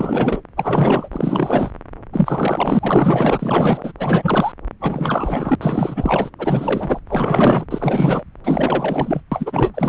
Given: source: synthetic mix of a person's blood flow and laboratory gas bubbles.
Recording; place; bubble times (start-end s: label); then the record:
Doppler ultrasound of blood flow; subclavian vein
0.00-0.41 s: bubbles
0.56-1.09 s: bubbles
1.12-1.71 s: bubbles
2.12-3.92 s: bubbles
3.99-4.52 s: bubbles
4.80-5.55 s: bubbles
5.62-6.30 s: bubbles
6.38-7.00 s: bubbles
7.08-7.65 s: bubbles
7.71-8.24 s: bubbles
8.44-9.21 s: bubbles
9.31-9.89 s: bubbles
From the record:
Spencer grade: 4 (maximum detectable bubble signal sounding continuously throughout systole and diastole of every cardiac period, and overriding the amplitude of the normal cardiac signals); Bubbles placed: anywhere in the cardiac cycle